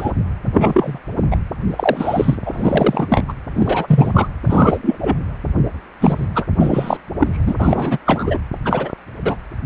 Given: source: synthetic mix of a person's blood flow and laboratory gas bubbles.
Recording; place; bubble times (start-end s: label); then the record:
Doppler ultrasound of blood flow; precordium
0.00-0.12 s: bubbles
0.54-0.99 s: bubbles
1.16-1.21 s: bubbles
1.31-1.37 s: bubbles
1.71-2.36 s: bubbles
2.46-3.23 s: bubbles
3.28-3.33 s: bubbles
3.54-4.28 s: bubbles
4.44-4.78 s: bubbles
4.82-4.98 s: bubbles
5.00-5.17 s: bubbles
6.00-6.29 s: bubbles
6.35-6.46 s: bubbles
6.60-6.97 s: bubbles
7.20-7.28 s: bubbles
7.33-7.55 s: bubbles
7.59-7.97 s: bubbles
8.05-8.38 s: bubbles
8.64-8.93 s: bubbles
9.24-9.36 s: bubbles
From the record:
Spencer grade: 3 (all of the cardiac periods contain showers or single bubble signals, but not dominating or overriding the cardiac motion signals); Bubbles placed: anywhere in the cardiac cycle